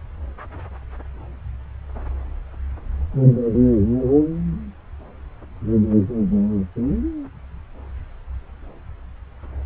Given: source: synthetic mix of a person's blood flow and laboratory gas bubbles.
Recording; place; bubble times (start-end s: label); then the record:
Doppler ultrasound of blood flow; subclavian vein
no bubbles
From the record:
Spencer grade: 0 (complete lack of bubble signals)